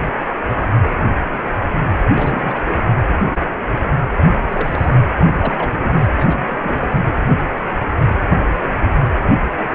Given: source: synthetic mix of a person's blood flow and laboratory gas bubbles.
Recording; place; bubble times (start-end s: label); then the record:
Doppler ultrasound of blood flow; precordium
2.15-2.61 s: bubbles
2.68-2.85 s: bubbles
4.15-4.38 s: bubbles
4.49-4.97 s: bubbles
5.16-5.54 s: bubbles
5.58-6.10 s: bubbles
6.17-7.04 s: bubbles
From the record:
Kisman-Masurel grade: 221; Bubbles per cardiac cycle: several, 3 to 8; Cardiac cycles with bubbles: 10 to 50%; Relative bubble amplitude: barely perceptible (0.100 to 0.250); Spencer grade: 2 (many but less than half of the cardiac periods contain bubble signals, singularly or in groups); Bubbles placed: anywhere in the cardiac cycle